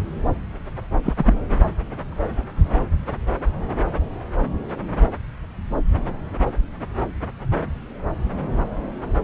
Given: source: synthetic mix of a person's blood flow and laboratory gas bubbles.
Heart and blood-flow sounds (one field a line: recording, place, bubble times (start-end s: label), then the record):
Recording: Doppler ultrasound of blood flow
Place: subclavian vein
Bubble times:
1.04-1.13 s: bubbles
1.17-1.33 s: bubbles
From the record:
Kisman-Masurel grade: 212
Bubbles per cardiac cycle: several, 3 to 8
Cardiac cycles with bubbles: 1 to 10%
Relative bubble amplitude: moderate (0.250 to 0.450)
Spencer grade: 1 (occasional bubble signal discernible with the cardiac motion signal, with majority of cardiac periods free of bubbles)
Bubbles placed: anywhere in the cardiac cycle